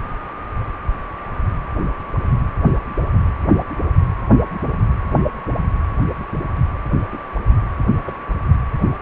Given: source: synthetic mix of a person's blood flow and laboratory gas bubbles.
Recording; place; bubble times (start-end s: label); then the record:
Doppler ultrasound of blood flow; precordium
7.12-7.18 s: bubbles
8.04-8.13 s: bubbles
From the record:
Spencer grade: 2 (many but less than half of the cardiac periods contain bubble signals, singularly or in groups); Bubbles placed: anywhere in the cardiac cycle